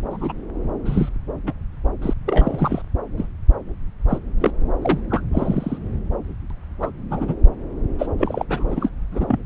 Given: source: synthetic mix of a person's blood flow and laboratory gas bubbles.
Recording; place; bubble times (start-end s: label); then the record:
Doppler ultrasound of blood flow; subclavian vein
0.11-0.33 s: bubbles
0.85-1.09 s: bubbles
1.47-1.54 s: bubbles
2.01-2.13 s: bubbles
2.25-2.83 s: bubbles
3.17-3.28 s: bubbles
4.08-4.19 s: bubbles
4.41-4.51 s: bubbles
4.82-5.00 s: bubbles
5.10-5.23 s: bubbles
5.32-5.79 s: bubbles
6.50-6.53 s: bubbles
6.80-6.90 s: bubbles
7.11-7.35 s: bubbles
7.98-8.09 s: bubbles
8.19-8.45 s: bubbles
8.49-8.89 s: bubbles
9.12-9.38 s: bubbles
From the record:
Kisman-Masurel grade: 242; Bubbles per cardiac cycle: several, 3 to 8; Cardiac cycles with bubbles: 100%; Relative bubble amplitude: moderate (0.250 to 0.450); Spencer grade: 3 (all of the cardiac periods contain showers or single bubble signals, but not dominating or overriding the cardiac motion signals); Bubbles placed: anywhere in the cardiac cycle